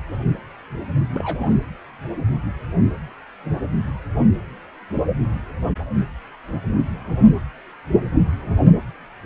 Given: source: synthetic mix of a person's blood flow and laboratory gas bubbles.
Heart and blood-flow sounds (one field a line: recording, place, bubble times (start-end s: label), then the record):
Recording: Doppler ultrasound of blood flow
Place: precordium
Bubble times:
1.14-1.54 s: bubbles
From the record:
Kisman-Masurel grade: 211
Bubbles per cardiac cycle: several, 3 to 8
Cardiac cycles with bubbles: 1 to 10%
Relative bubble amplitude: barely perceptible (0.100 to 0.250)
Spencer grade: 1 (occasional bubble signal discernible with the cardiac motion signal, with majority of cardiac periods free of bubbles)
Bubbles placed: anywhere in the cardiac cycle